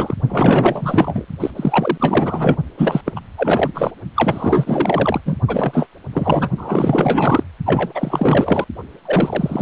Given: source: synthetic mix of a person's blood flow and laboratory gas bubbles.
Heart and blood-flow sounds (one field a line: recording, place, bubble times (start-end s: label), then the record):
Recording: Doppler ultrasound of blood flow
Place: precordium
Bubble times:
0.00-0.15 s: bubbles
0.28-1.25 s: bubbles
1.40-1.50 s: bubbles
1.56-2.57 s: bubbles
2.77-3.01 s: bubbles
3.06-3.12 s: bubbles
3.16-3.21 s: bubbles
3.37-3.72 s: bubbles
3.75-3.91 s: bubbles
4.16-5.21 s: bubbles
5.25-5.36 s: bubbles
5.48-5.87 s: bubbles
6.13-6.49 s: bubbles
6.58-7.44 s: bubbles
7.65-8.64 s: bubbles
9.05-9.62 s: bubbles
From the record:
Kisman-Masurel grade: 444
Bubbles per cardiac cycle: continuous sound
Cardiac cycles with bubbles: 100%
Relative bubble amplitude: maximal (0.775 to 0.999)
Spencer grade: 4 (maximum detectable bubble signal sounding continuously throughout systole and diastole of every cardiac period, and overriding the amplitude of the normal cardiac signals)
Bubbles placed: only in the low amplitude regions of the cardiac cycle